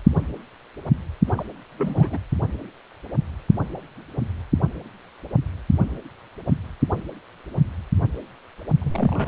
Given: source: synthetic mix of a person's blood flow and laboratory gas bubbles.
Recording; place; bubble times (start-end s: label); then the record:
Doppler ultrasound of blood flow; precordium
1.27-1.44 s: bubbles
1.78-2.18 s: bubbles
8.82-9.28 s: bubbles
From the record:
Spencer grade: 2 (many but less than half of the cardiac periods contain bubble signals, singularly or in groups); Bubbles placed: only in the low amplitude regions of the cardiac cycle